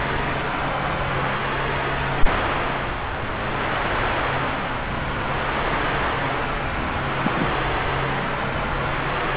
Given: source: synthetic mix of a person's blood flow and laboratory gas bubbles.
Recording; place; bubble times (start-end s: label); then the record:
Doppler ultrasound of blood flow; subclavian vein
7.23-7.55 s: bubbles
From the record:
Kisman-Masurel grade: 112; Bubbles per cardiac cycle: 1 to 2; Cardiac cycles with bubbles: 1 to 10%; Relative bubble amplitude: moderate (0.250 to 0.450); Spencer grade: 1 (occasional bubble signal discernible with the cardiac motion signal, with majority of cardiac periods free of bubbles); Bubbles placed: anywhere in the cardiac cycle